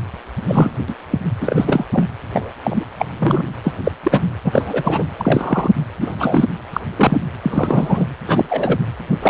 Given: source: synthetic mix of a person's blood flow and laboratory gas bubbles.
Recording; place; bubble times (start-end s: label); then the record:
Doppler ultrasound of blood flow; precordium
0.48-0.70 s: bubbles
0.88-0.95 s: bubbles
1.11-1.19 s: bubbles
1.41-1.84 s: bubbles
1.92-2.07 s: bubbles
2.33-2.51 s: bubbles
2.63-2.84 s: bubbles
2.98-3.06 s: bubbles
3.19-3.48 s: bubbles
3.64-3.75 s: bubbles
3.83-3.92 s: bubbles
4.03-4.30 s: bubbles
4.44-5.04 s: bubbles
5.17-5.71 s: bubbles
6.00-6.56 s: bubbles
6.73-6.80 s: bubbles
6.96-7.17 s: bubbles
7.42-8.05 s: bubbles
8.27-8.45 s: bubbles
8.50-8.79 s: bubbles
9.22-9.30 s: bubbles
From the record:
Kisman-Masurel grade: 243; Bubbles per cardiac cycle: several, 3 to 8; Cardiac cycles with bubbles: 100%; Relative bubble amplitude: loud (0.450 to 0.775); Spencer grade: 3 (all of the cardiac periods contain showers or single bubble signals, but not dominating or overriding the cardiac motion signals); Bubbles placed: anywhere in the cardiac cycle